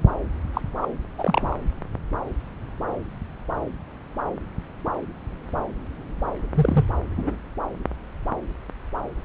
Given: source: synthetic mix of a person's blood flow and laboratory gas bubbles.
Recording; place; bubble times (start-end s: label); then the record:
Doppler ultrasound of blood flow; subclavian vein
0.53-0.61 s: bubbles
0.81-0.88 s: bubbles
1.18-1.56 s: bubbles
6.54-6.85 s: bubbles
7.17-7.36 s: bubbles
From the record:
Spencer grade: 2 (many but less than half of the cardiac periods contain bubble signals, singularly or in groups); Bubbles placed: anywhere in the cardiac cycle